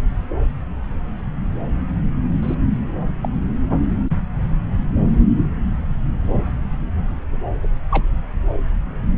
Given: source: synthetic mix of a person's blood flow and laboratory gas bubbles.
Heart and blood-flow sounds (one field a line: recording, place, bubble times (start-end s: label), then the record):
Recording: Doppler ultrasound of blood flow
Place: subclavian vein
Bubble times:
2.42-2.55 s: bubbles
3.23-3.29 s: bubbles
7.90-8.04 s: bubbles
From the record:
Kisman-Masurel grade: 121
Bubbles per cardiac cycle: 1 to 2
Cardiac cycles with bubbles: 10 to 50%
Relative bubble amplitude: barely perceptible (0.100 to 0.250)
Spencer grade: 2 (many but less than half of the cardiac periods contain bubble signals, singularly or in groups)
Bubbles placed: anywhere in the cardiac cycle